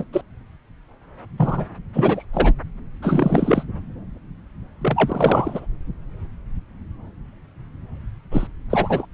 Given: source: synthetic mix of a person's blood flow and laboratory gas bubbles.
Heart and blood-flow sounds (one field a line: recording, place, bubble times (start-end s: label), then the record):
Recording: Doppler ultrasound of blood flow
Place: subclavian vein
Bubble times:
0.00-0.07 s: bubbles
0.12-0.22 s: bubbles
1.37-1.65 s: bubbles
1.94-2.25 s: bubbles
2.33-2.54 s: bubbles
3.02-3.63 s: bubbles
4.81-5.67 s: bubbles
8.31-8.47 s: bubbles
8.69-9.06 s: bubbles
From the record:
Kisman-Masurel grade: 333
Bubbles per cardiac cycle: rolling drumbeat, 9 or more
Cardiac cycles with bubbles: 50 to 99%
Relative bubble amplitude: loud (0.450 to 0.775)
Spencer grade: 3 (all of the cardiac periods contain showers or single bubble signals, but not dominating or overriding the cardiac motion signals)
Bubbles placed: anywhere in the cardiac cycle